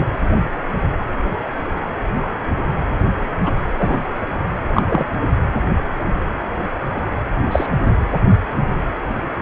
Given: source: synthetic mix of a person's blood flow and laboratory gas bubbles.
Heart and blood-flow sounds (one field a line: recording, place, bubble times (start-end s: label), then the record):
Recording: Doppler ultrasound of blood flow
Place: precordium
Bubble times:
0.00-0.07 s: bubbles
3.44-3.51 s: bubbles
3.78-4.02 s: bubbles
4.74-4.83 s: bubbles
4.89-5.07 s: bubbles
7.51-7.67 s: bubbles
From the record:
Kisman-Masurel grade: 123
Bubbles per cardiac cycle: 1 to 2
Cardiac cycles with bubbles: 10 to 50%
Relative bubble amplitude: loud (0.450 to 0.775)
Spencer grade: 2 (many but less than half of the cardiac periods contain bubble signals, singularly or in groups)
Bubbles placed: anywhere in the cardiac cycle